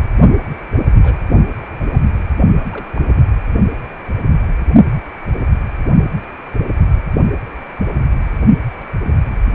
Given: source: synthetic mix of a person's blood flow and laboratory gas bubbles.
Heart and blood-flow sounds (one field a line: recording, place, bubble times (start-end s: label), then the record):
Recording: Doppler ultrasound of blood flow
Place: precordium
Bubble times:
0.98-1.20 s: bubbles
1.32-1.42 s: bubbles
1.61-1.66 s: bubbles
1.79-1.87 s: bubbles
1.92-2.00 s: bubbles
2.57-2.92 s: bubbles
2.95-3.02 s: bubbles
3.08-3.22 s: bubbles
8.78-8.86 s: bubbles
9.04-9.10 s: bubbles
9.18-9.22 s: bubbles
From the record:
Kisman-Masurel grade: 221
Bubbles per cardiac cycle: several, 3 to 8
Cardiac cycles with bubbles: 10 to 50%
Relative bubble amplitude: barely perceptible (0.100 to 0.250)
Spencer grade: 2 (many but less than half of the cardiac periods contain bubble signals, singularly or in groups)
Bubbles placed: only in the low amplitude regions of the cardiac cycle